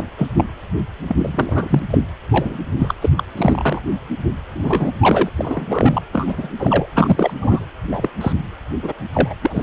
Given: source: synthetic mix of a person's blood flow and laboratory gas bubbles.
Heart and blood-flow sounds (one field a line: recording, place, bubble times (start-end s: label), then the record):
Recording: Doppler ultrasound of blood flow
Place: precordium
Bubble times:
0.00-0.03 s: bubbles
0.17-0.27 s: bubbles
0.36-0.45 s: bubbles
1.07-1.79 s: bubbles
1.90-1.98 s: bubbles
2.32-2.58 s: bubbles
2.78-2.95 s: bubbles
3.01-3.10 s: bubbles
3.17-3.24 s: bubbles
3.37-3.81 s: bubbles
4.54-4.92 s: bubbles
5.00-5.30 s: bubbles
5.38-6.02 s: bubbles
6.12-6.49 s: bubbles
6.58-6.86 s: bubbles
6.94-7.33 s: bubbles
7.37-7.66 s: bubbles
7.88-8.10 s: bubbles
8.21-8.33 s: bubbles
8.83-8.93 s: bubbles
9.13-9.34 s: bubbles
9.42-9.63 s: bubbles
From the record:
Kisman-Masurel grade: 243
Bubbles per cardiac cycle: several, 3 to 8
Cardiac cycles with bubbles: 100%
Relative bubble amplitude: loud (0.450 to 0.775)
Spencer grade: 3 (all of the cardiac periods contain showers or single bubble signals, but not dominating or overriding the cardiac motion signals)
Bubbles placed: anywhere in the cardiac cycle